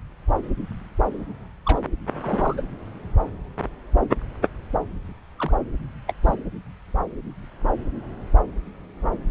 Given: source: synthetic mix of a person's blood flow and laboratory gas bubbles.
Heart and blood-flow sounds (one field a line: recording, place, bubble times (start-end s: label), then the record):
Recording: Doppler ultrasound of blood flow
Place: subclavian vein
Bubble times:
1.65-1.82 s: bubbles
2.21-2.61 s: bubbles
5.37-5.52 s: bubbles
5.56-5.59 s: bubbles
6.08-6.13 s: bubbles
6.23-6.35 s: bubbles
From the record:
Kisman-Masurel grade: 121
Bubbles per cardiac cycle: 1 to 2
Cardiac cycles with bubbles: 10 to 50%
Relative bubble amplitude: barely perceptible (0.100 to 0.250)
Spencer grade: 2 (many but less than half of the cardiac periods contain bubble signals, singularly or in groups)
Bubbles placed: anywhere in the cardiac cycle